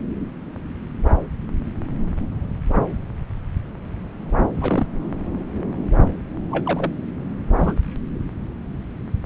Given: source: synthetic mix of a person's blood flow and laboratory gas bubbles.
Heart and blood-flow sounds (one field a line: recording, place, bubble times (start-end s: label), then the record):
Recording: Doppler ultrasound of blood flow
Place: subclavian vein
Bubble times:
4.54-4.87 s: bubbles
6.51-6.91 s: bubbles
7.55-7.75 s: bubbles
From the record:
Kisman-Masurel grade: 122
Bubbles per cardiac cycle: 1 to 2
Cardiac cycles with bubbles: 10 to 50%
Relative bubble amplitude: moderate (0.250 to 0.450)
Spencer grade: 2 (many but less than half of the cardiac periods contain bubble signals, singularly or in groups)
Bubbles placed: anywhere in the cardiac cycle